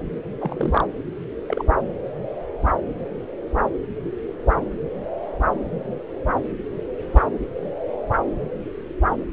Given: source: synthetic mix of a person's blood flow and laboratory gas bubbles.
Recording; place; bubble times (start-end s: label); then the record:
Doppler ultrasound of blood flow; subclavian vein
0.41-0.84 s: bubbles
1.48-1.62 s: bubbles
7.13-7.24 s: bubbles
From the record:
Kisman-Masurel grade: 121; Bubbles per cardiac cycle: 1 to 2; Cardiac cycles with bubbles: 10 to 50%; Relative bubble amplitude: barely perceptible (0.100 to 0.250); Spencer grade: 2 (many but less than half of the cardiac periods contain bubble signals, singularly or in groups); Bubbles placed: anywhere in the cardiac cycle